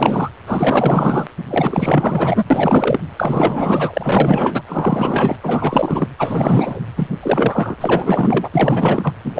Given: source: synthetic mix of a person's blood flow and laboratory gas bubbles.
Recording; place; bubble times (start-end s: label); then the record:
Doppler ultrasound of blood flow; precordium
0.00-0.31 s: bubbles
0.46-1.27 s: bubbles
1.49-2.44 s: bubbles
2.50-3.00 s: bubbles
3.17-4.62 s: bubbles
4.67-5.37 s: bubbles
5.43-6.08 s: bubbles
6.18-6.80 s: bubbles
6.96-7.08 s: bubbles
7.22-7.76 s: bubbles
7.80-8.50 s: bubbles
8.54-9.13 s: bubbles
9.24-9.40 s: bubbles
From the record:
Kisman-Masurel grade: 444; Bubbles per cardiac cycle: continuous sound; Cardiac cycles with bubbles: 100%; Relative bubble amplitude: maximal (0.775 to 0.999); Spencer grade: 4 (maximum detectable bubble signal sounding continuously throughout systole and diastole of every cardiac period, and overriding the amplitude of the normal cardiac signals); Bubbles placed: anywhere in the cardiac cycle